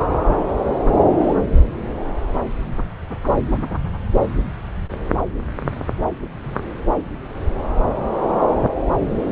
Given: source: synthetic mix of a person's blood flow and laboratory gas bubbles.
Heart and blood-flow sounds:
Doppler ultrasound of blood flow; subclavian vein
1.20-1.34 s: bubbles
From the record:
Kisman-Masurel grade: 112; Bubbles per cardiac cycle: 1 to 2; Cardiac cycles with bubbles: 1 to 10%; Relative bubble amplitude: moderate (0.250 to 0.450); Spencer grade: 1 (occasional bubble signal discernible with the cardiac motion signal, with majority of cardiac periods free of bubbles); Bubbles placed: anywhere in the cardiac cycle

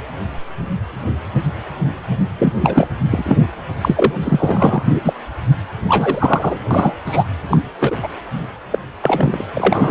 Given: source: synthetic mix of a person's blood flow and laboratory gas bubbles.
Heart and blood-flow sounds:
Doppler ultrasound of blood flow; precordium
2.38-2.54 s: bubbles
2.61-2.88 s: bubbles
3.12-3.37 s: bubbles
3.81-4.13 s: bubbles
4.21-4.94 s: bubbles
5.05-5.13 s: bubbles
5.88-6.58 s: bubbles
6.71-6.94 s: bubbles
7.06-7.24 s: bubbles
7.50-7.58 s: bubbles
7.80-7.96 s: bubbles
8.02-8.09 s: bubbles
8.71-8.79 s: bubbles
9.01-9.45 s: bubbles
9.54-9.91 s: bubbles
From the record:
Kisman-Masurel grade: 233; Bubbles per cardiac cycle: several, 3 to 8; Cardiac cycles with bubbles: 50 to 99%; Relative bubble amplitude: loud (0.450 to 0.775); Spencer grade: 3 (all of the cardiac periods contain showers or single bubble signals, but not dominating or overriding the cardiac motion signals); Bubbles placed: anywhere in the cardiac cycle

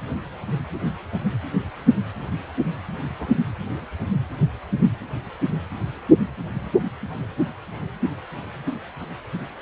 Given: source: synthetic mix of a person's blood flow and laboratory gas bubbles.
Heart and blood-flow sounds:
Doppler ultrasound of blood flow; precordium
3.20-3.27 s: bubbles
From the record:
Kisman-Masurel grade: 111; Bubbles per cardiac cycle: 1 to 2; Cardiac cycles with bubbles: 1 to 10%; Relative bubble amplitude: barely perceptible (0.100 to 0.250); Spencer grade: 1 (occasional bubble signal discernible with the cardiac motion signal, with majority of cardiac periods free of bubbles); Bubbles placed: anywhere in the cardiac cycle

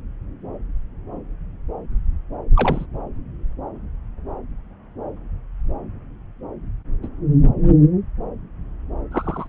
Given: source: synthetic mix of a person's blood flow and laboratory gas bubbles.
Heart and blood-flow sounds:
Doppler ultrasound of blood flow; subclavian vein
2.54-2.86 s: bubbles
7.03-7.08 s: bubbles
9.11-9.47 s: bubbles
From the record:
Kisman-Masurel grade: 122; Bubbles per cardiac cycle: 1 to 2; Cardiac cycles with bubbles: 10 to 50%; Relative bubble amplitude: moderate (0.250 to 0.450); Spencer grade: 2 (many but less than half of the cardiac periods contain bubble signals, singularly or in groups); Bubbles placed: anywhere in the cardiac cycle

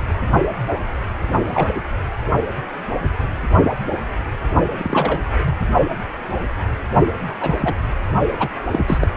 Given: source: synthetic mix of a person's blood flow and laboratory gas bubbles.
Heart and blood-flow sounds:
Doppler ultrasound of blood flow; precordium
1.43-1.71 s: bubbles
1.75-1.81 s: bubbles
4.78-5.20 s: bubbles
5.46-5.53 s: bubbles
7.41-7.74 s: bubbles
8.38-8.50 s: bubbles
8.71-8.99 s: bubbles
9.01-9.08 s: bubbles
From the record:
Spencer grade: 2 (many but less than half of the cardiac periods contain bubble signals, singularly or in groups); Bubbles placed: only in the low amplitude regions of the cardiac cycle

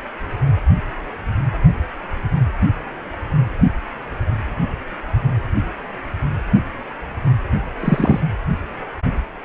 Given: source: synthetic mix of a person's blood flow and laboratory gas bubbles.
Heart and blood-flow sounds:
Doppler ultrasound of blood flow; precordium
7.80-8.20 s: bubbles
From the record:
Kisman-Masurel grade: 113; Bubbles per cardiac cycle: 1 to 2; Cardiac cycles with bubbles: 1 to 10%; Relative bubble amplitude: loud (0.450 to 0.775); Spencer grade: 1 (occasional bubble signal discernible with the cardiac motion signal, with majority of cardiac periods free of bubbles); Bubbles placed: only in the low amplitude regions of the cardiac cycle

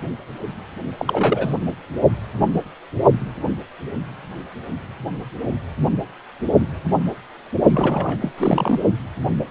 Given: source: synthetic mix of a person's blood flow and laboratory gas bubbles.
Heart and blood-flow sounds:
Doppler ultrasound of blood flow; precordium
0.98-1.56 s: bubbles
7.70-8.19 s: bubbles
8.21-8.32 s: bubbles
8.38-8.79 s: bubbles
From the record:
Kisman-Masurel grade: 222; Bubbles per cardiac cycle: several, 3 to 8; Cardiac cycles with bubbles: 10 to 50%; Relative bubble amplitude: moderate (0.250 to 0.450); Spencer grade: 2 (many but less than half of the cardiac periods contain bubble signals, singularly or in groups); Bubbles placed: only in the low amplitude regions of the cardiac cycle

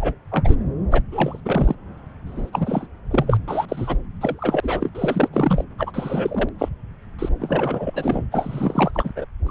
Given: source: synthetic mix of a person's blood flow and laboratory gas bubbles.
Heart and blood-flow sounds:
Doppler ultrasound of blood flow; subclavian vein
0.00-0.14 s: bubbles
0.31-0.56 s: bubbles
0.91-1.02 s: bubbles
1.11-1.40 s: bubbles
1.45-1.75 s: bubbles
2.27-2.87 s: bubbles
3.10-3.38 s: bubbles
3.48-3.65 s: bubbles
3.69-3.97 s: bubbles
4.21-4.60 s: bubbles
4.62-4.89 s: bubbles
4.94-5.28 s: bubbles
5.33-5.64 s: bubbles
5.78-5.91 s: bubbles
5.93-6.49 s: bubbles
6.58-6.68 s: bubbles
7.18-7.29 s: bubbles
7.39-8.23 s: bubbles
8.32-8.91 s: bubbles
8.95-9.12 s: bubbles
9.16-9.25 s: bubbles
9.46-9.51 s: bubbles
From the record:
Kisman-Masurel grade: 342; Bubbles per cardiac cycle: rolling drumbeat, 9 or more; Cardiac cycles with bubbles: 100%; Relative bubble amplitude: moderate (0.250 to 0.450); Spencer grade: 3 (all of the cardiac periods contain showers or single bubble signals, but not dominating or overriding the cardiac motion signals); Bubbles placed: anywhere in the cardiac cycle

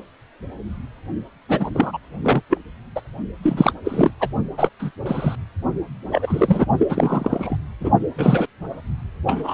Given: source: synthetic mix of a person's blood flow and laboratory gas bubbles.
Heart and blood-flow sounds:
Doppler ultrasound of blood flow; precordium
1.48-1.71 s: bubbles
1.75-1.98 s: bubbles
2.23-2.42 s: bubbles
2.50-2.57 s: bubbles
2.96-3.01 s: bubbles
3.42-3.72 s: bubbles
3.84-4.11 s: bubbles
4.20-4.28 s: bubbles
4.58-4.68 s: bubbles
4.79-4.91 s: bubbles
5.05-5.35 s: bubbles
6.12-6.67 s: bubbles
6.78-7.56 s: bubbles
7.80-7.90 s: bubbles
8.18-8.46 s: bubbles
9.26-9.54 s: bubbles
From the record:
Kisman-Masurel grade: 233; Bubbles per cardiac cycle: several, 3 to 8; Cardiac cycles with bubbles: 50 to 99%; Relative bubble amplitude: loud (0.450 to 0.775); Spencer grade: 3 (all of the cardiac periods contain showers or single bubble signals, but not dominating or overriding the cardiac motion signals); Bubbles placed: only in the low amplitude regions of the cardiac cycle

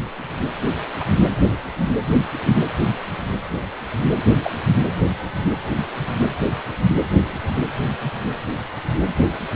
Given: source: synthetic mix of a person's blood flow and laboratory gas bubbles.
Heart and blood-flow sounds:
Doppler ultrasound of blood flow; precordium
0.99-1.04 s: bubbles
2.10-2.17 s: bubbles
2.46-2.54 s: bubbles
4.43-4.50 s: bubbles
From the record:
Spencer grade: 2 (many but less than half of the cardiac periods contain bubble signals, singularly or in groups); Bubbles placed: anywhere in the cardiac cycle

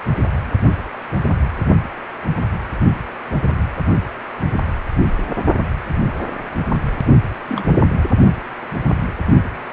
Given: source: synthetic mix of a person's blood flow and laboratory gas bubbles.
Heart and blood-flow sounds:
Doppler ultrasound of blood flow; precordium
7.48-7.87 s: bubbles
From the record:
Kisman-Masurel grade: 212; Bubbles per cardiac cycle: several, 3 to 8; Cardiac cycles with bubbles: 1 to 10%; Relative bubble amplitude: moderate (0.250 to 0.450); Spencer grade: 1 (occasional bubble signal discernible with the cardiac motion signal, with majority of cardiac periods free of bubbles); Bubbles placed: only in the low amplitude regions of the cardiac cycle

